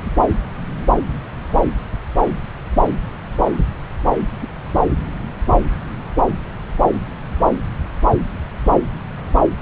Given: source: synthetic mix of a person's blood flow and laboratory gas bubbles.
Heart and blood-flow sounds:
Doppler ultrasound of blood flow; subclavian vein
4.40-4.48 s: bubbles
From the record:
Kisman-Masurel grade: 111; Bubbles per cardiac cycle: 1 to 2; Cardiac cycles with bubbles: 1 to 10%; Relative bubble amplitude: barely perceptible (0.100 to 0.250); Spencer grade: 1 (occasional bubble signal discernible with the cardiac motion signal, with majority of cardiac periods free of bubbles); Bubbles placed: anywhere in the cardiac cycle

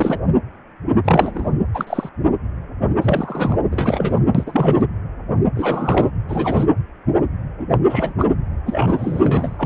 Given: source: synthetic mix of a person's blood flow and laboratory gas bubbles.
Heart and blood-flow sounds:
Doppler ultrasound of blood flow; precordium
0.00-0.19 s: bubbles
1.04-1.52 s: bubbles
1.74-2.10 s: bubbles
3.01-3.58 s: bubbles
3.71-4.20 s: bubbles
4.34-4.82 s: bubbles
5.55-6.11 s: bubbles
6.28-6.67 s: bubbles
7.59-7.67 s: bubbles
7.70-7.78 s: bubbles
7.89-8.13 s: bubbles
8.17-8.29 s: bubbles
8.66-9.66 s: bubbles
From the record:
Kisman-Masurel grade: 233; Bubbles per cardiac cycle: several, 3 to 8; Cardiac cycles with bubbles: 50 to 99%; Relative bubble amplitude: loud (0.450 to 0.775); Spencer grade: 3 (all of the cardiac periods contain showers or single bubble signals, but not dominating or overriding the cardiac motion signals); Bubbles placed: anywhere in the cardiac cycle

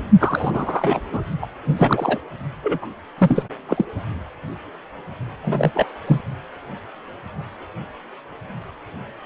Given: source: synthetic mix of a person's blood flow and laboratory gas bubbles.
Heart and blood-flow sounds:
Doppler ultrasound of blood flow; precordium
0.19-1.00 s: bubbles
1.12-1.22 s: bubbles
1.42-1.46 s: bubbles
1.67-2.18 s: bubbles
2.62-2.79 s: bubbles
2.82-2.87 s: bubbles
3.17-3.43 s: bubbles
3.68-3.85 s: bubbles
5.42-5.86 s: bubbles
6.06-6.21 s: bubbles
From the record:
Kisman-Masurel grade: 333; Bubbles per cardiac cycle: rolling drumbeat, 9 or more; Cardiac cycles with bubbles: 50 to 99%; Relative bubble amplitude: loud (0.450 to 0.775); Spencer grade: 3 (all of the cardiac periods contain showers or single bubble signals, but not dominating or overriding the cardiac motion signals); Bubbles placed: only in the low amplitude regions of the cardiac cycle

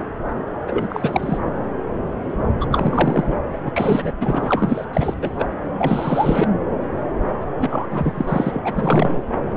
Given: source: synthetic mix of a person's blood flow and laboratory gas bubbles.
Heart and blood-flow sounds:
Doppler ultrasound of blood flow; subclavian vein
0.68-1.38 s: bubbles
2.60-2.66 s: bubbles
2.71-3.36 s: bubbles
3.52-3.57 s: bubbles
3.62-3.71 s: bubbles
3.76-4.15 s: bubbles
4.20-4.85 s: bubbles
4.93-5.14 s: bubbles
5.21-5.46 s: bubbles
5.78-6.50 s: bubbles
7.58-7.86 s: bubbles
7.89-8.59 s: bubbles
8.64-9.22 s: bubbles
From the record:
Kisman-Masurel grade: 333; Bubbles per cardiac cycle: rolling drumbeat, 9 or more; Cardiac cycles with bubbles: 50 to 99%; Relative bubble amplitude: loud (0.450 to 0.775); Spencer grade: 3 (all of the cardiac periods contain showers or single bubble signals, but not dominating or overriding the cardiac motion signals); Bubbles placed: anywhere in the cardiac cycle

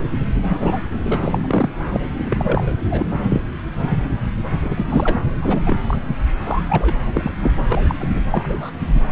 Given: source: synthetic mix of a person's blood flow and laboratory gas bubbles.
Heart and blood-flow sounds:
Doppler ultrasound of blood flow; subclavian vein
0.49-0.86 s: bubbles
1.05-1.68 s: bubbles
1.93-2.01 s: bubbles
2.18-2.72 s: bubbles
2.90-3.06 s: bubbles
3.29-3.42 s: bubbles
4.62-5.21 s: bubbles
5.42-5.77 s: bubbles
5.88-5.97 s: bubbles
6.07-6.16 s: bubbles
6.46-6.62 s: bubbles
6.69-6.94 s: bubbles
7.13-7.31 s: bubbles
7.40-7.51 s: bubbles
7.57-7.65 s: bubbles
7.69-7.95 s: bubbles
7.99-8.20 s: bubbles
8.30-8.70 s: bubbles
From the record:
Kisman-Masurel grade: 342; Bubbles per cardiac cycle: rolling drumbeat, 9 or more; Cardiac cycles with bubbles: 100%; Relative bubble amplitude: moderate (0.250 to 0.450); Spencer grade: 3 (all of the cardiac periods contain showers or single bubble signals, but not dominating or overriding the cardiac motion signals); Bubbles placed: anywhere in the cardiac cycle

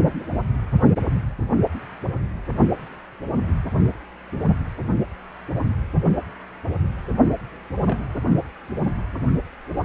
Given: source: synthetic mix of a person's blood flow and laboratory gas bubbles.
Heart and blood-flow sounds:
Doppler ultrasound of blood flow; precordium
7.85-7.98 s: bubbles
From the record:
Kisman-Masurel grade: 111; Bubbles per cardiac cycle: 1 to 2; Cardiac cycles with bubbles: 1 to 10%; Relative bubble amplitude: barely perceptible (0.100 to 0.250); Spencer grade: 1 (occasional bubble signal discernible with the cardiac motion signal, with majority of cardiac periods free of bubbles); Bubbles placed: only in the low amplitude regions of the cardiac cycle

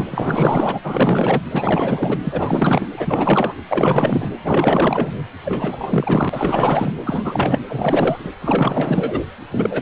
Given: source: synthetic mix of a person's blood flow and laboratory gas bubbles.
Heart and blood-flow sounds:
Doppler ultrasound of blood flow; precordium
0.00-0.06 s: bubbles
0.10-0.78 s: bubbles
0.83-1.41 s: bubbles
1.51-2.18 s: bubbles
2.24-2.86 s: bubbles
2.96-3.54 s: bubbles
3.69-4.29 s: bubbles
4.44-5.12 s: bubbles
5.45-6.94 s: bubbles
7.05-7.60 s: bubbles
7.67-8.30 s: bubbles
8.41-9.21 s: bubbles
9.52-9.81 s: bubbles
From the record:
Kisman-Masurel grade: 444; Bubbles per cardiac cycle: continuous sound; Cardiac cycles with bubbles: 100%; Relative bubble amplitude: maximal (0.775 to 0.999); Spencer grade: 4 (maximum detectable bubble signal sounding continuously throughout systole and diastole of every cardiac period, and overriding the amplitude of the normal cardiac signals); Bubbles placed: anywhere in the cardiac cycle

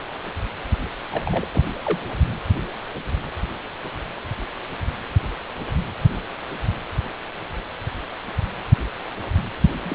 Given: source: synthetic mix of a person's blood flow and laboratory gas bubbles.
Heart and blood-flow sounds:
Doppler ultrasound of blood flow; precordium
1.11-1.47 s: bubbles
1.52-1.62 s: bubbles
1.84-1.99 s: bubbles
9.84-9.95 s: bubbles
From the record:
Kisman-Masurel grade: 121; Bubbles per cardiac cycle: 1 to 2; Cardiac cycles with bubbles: 10 to 50%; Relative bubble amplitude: barely perceptible (0.100 to 0.250); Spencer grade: 2 (many but less than half of the cardiac periods contain bubble signals, singularly or in groups); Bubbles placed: anywhere in the cardiac cycle

